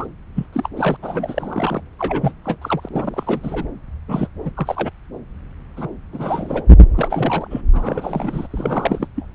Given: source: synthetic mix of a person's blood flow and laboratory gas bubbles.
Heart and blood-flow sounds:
Doppler ultrasound of blood flow; subclavian vein
0.00-0.06 s: bubbles
0.35-0.46 s: bubbles
0.52-0.69 s: bubbles
0.77-0.96 s: bubbles
1.02-1.81 s: bubbles
1.99-2.33 s: bubbles
2.45-2.56 s: bubbles
2.62-2.89 s: bubbles
2.92-3.65 s: bubbles
4.08-4.29 s: bubbles
4.45-4.51 s: bubbles
4.54-4.90 s: bubbles
5.76-5.89 s: bubbles
6.12-6.63 s: bubbles
6.94-7.47 s: bubbles
7.50-7.61 s: bubbles
7.72-8.47 s: bubbles
8.51-9.07 s: bubbles
9.16-9.26 s: bubbles
From the record:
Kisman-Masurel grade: 342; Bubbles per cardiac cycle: rolling drumbeat, 9 or more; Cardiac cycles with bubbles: 100%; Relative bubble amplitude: moderate (0.250 to 0.450); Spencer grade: 3 (all of the cardiac periods contain showers or single bubble signals, but not dominating or overriding the cardiac motion signals); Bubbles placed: anywhere in the cardiac cycle

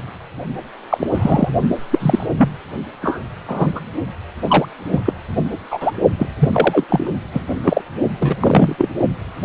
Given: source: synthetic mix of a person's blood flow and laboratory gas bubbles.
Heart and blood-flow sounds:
Doppler ultrasound of blood flow; precordium
0.90-1.07 s: bubbles
1.14-1.49 s: bubbles
1.91-2.27 s: bubbles
2.37-2.50 s: bubbles
3.02-3.18 s: bubbles
3.48-3.72 s: bubbles
3.75-3.81 s: bubbles
4.48-4.66 s: bubbles
4.91-5.00 s: bubbles
5.05-5.13 s: bubbles
5.71-5.92 s: bubbles
6.19-6.26 s: bubbles
6.39-6.50 s: bubbles
6.53-6.84 s: bubbles
6.90-7.10 s: bubbles
7.33-7.44 s: bubbles
7.64-7.81 s: bubbles
8.19-8.75 s: bubbles
8.77-8.89 s: bubbles
9.42-9.45 s: bubbles
From the record:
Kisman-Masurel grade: 243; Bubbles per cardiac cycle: several, 3 to 8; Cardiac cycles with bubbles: 100%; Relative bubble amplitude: loud (0.450 to 0.775); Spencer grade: 3 (all of the cardiac periods contain showers or single bubble signals, but not dominating or overriding the cardiac motion signals); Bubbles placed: only in the low amplitude regions of the cardiac cycle

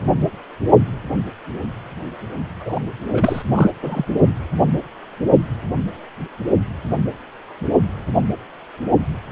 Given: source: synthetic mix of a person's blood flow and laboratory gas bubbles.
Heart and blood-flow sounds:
Doppler ultrasound of blood flow; precordium
2.59-2.79 s: bubbles
3.13-3.42 s: bubbles
3.53-3.71 s: bubbles
3.82-4.05 s: bubbles
From the record:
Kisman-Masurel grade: 222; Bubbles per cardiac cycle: several, 3 to 8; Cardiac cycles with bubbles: 10 to 50%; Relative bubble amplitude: moderate (0.250 to 0.450); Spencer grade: 2 (many but less than half of the cardiac periods contain bubble signals, singularly or in groups); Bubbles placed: only in the low amplitude regions of the cardiac cycle

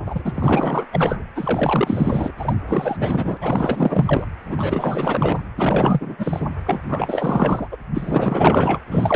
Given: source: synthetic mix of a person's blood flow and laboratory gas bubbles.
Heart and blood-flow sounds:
Doppler ultrasound of blood flow; precordium
0.06-0.85 s: bubbles
0.92-1.24 s: bubbles
1.34-2.33 s: bubbles
2.38-2.54 s: bubbles
2.67-2.96 s: bubbles
2.99-3.38 s: bubbles
3.41-4.26 s: bubbles
4.45-5.42 s: bubbles
5.57-6.16 s: bubbles
6.18-6.47 s: bubbles
6.66-6.79 s: bubbles
6.88-7.68 s: bubbles
7.71-7.77 s: bubbles
7.93-8.78 s: bubbles
8.90-9.16 s: bubbles
From the record:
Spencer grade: 4 (maximum detectable bubble signal sounding continuously throughout systole and diastole of every cardiac period, and overriding the amplitude of the normal cardiac signals); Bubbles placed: anywhere in the cardiac cycle

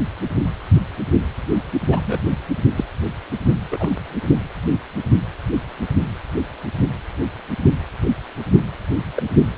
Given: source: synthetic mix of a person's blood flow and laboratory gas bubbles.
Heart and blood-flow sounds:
Doppler ultrasound of blood flow; precordium
1.89-2.33 s: bubbles
2.76-2.85 s: bubbles
3.71-3.90 s: bubbles
8.97-9.04 s: bubbles
9.16-9.22 s: bubbles
From the record:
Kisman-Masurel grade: 122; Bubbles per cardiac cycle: 1 to 2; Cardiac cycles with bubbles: 10 to 50%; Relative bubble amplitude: moderate (0.250 to 0.450); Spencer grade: 2 (many but less than half of the cardiac periods contain bubble signals, singularly or in groups); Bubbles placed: only in the low amplitude regions of the cardiac cycle

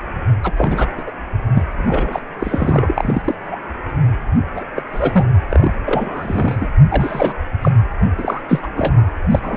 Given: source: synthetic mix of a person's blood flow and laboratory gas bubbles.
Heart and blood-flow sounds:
Doppler ultrasound of blood flow; precordium
0.43-0.52 s: bubbles
0.56-0.89 s: bubbles
0.97-1.03 s: bubbles
1.06-1.11 s: bubbles
1.54-1.64 s: bubbles
1.77-2.20 s: bubbles
2.38-3.35 s: bubbles
3.51-3.59 s: bubbles
4.54-4.64 s: bubbles
4.75-4.83 s: bubbles
4.92-5.25 s: bubbles
5.49-5.73 s: bubbles
5.85-6.71 s: bubbles
6.92-7.35 s: bubbles
7.61-7.71 s: bubbles
8.18-8.42 s: bubbles
8.49-8.67 s: bubbles
8.76-9.02 s: bubbles
9.31-9.39 s: bubbles
9.42-9.57 s: bubbles
From the record:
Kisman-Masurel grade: 242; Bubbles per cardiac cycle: several, 3 to 8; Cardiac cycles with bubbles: 100%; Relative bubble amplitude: moderate (0.250 to 0.450); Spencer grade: 3 (all of the cardiac periods contain showers or single bubble signals, but not dominating or overriding the cardiac motion signals); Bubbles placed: anywhere in the cardiac cycle

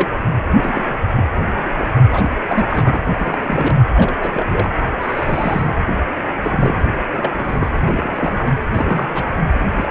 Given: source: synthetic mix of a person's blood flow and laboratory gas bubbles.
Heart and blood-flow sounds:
Doppler ultrasound of blood flow; precordium
0.00-0.08 s: bubbles
0.18-0.32 s: bubbles
0.58-0.84 s: bubbles
0.88-0.94 s: bubbles
1.17-1.23 s: bubbles
1.79-1.88 s: bubbles
2.11-2.29 s: bubbles
2.48-2.65 s: bubbles
2.69-2.98 s: bubbles
3.19-3.79 s: bubbles
3.96-4.74 s: bubbles
5.00-5.76 s: bubbles
6.42-6.77 s: bubbles
7.13-7.68 s: bubbles
7.81-8.42 s: bubbles
8.74-9.30 s: bubbles
9.76-9.91 s: bubbles
From the record:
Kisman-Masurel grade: 242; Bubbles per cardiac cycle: several, 3 to 8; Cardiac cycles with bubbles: 100%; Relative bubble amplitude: moderate (0.250 to 0.450); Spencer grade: 3 (all of the cardiac periods contain showers or single bubble signals, but not dominating or overriding the cardiac motion signals); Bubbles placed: anywhere in the cardiac cycle

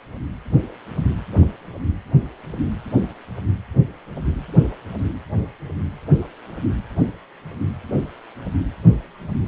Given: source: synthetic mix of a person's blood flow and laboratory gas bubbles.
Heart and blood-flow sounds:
Doppler ultrasound of blood flow; precordium
no bubbles
From the record:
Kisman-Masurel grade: 000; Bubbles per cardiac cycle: 0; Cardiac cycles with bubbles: 0%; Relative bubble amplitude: no bubbles discernible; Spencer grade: 0 (complete lack of bubble signals)

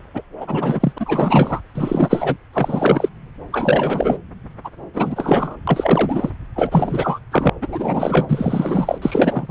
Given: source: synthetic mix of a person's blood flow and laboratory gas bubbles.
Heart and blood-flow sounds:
Doppler ultrasound of blood flow; subclavian vein
0.14-0.21 s: bubbles
0.40-0.92 s: bubbles
0.96-1.61 s: bubbles
1.75-2.37 s: bubbles
2.53-3.09 s: bubbles
3.52-4.18 s: bubbles
4.64-4.69 s: bubbles
4.93-5.56 s: bubbles
5.67-6.30 s: bubbles
6.55-7.19 s: bubbles
7.31-7.50 s: bubbles
7.62-8.27 s: bubbles
8.29-8.98 s: bubbles
9.02-9.51 s: bubbles
From the record:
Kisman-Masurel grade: 343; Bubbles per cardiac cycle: rolling drumbeat, 9 or more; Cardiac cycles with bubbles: 100%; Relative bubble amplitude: loud (0.450 to 0.775); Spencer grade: 3 (all of the cardiac periods contain showers or single bubble signals, but not dominating or overriding the cardiac motion signals); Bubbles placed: anywhere in the cardiac cycle

